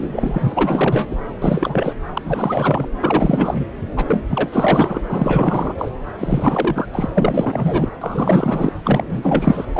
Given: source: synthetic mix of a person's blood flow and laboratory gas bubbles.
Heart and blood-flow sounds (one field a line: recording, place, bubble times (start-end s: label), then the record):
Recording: Doppler ultrasound of blood flow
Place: subclavian vein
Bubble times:
0.00-1.26 s: bubbles
1.42-1.96 s: bubbles
2.13-2.21 s: bubbles
2.25-2.86 s: bubbles
3.03-3.66 s: bubbles
3.96-4.22 s: bubbles
4.27-5.00 s: bubbles
5.09-5.89 s: bubbles
6.18-6.88 s: bubbles
6.92-7.08 s: bubbles
7.13-7.91 s: bubbles
8.02-8.72 s: bubbles
8.85-9.65 s: bubbles
9.73-9.79 s: bubbles
From the record:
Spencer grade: 4 (maximum detectable bubble signal sounding continuously throughout systole and diastole of every cardiac period, and overriding the amplitude of the normal cardiac signals)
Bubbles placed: anywhere in the cardiac cycle